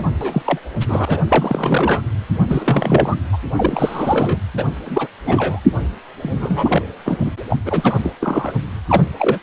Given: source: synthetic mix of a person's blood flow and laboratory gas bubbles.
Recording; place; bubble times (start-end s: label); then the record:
Doppler ultrasound of blood flow; precordium
0.00-0.12 s: bubbles
0.20-0.42 s: bubbles
0.46-0.59 s: bubbles
0.80-1.24 s: bubbles
1.28-2.02 s: bubbles
2.48-3.16 s: bubbles
3.32-3.38 s: bubbles
3.58-4.39 s: bubbles
4.56-4.66 s: bubbles
4.85-5.08 s: bubbles
5.25-5.60 s: bubbles
6.22-6.82 s: bubbles
7.05-7.18 s: bubbles
7.24-7.30 s: bubbles
7.50-7.58 s: bubbles
7.65-7.93 s: bubbles
8.03-8.12 s: bubbles
8.20-8.52 s: bubbles
8.88-9.03 s: bubbles
9.19-9.39 s: bubbles
From the record:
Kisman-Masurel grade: 342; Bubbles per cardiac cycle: rolling drumbeat, 9 or more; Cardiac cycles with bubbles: 100%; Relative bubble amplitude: moderate (0.250 to 0.450); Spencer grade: 3 (all of the cardiac periods contain showers or single bubble signals, but not dominating or overriding the cardiac motion signals); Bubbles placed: anywhere in the cardiac cycle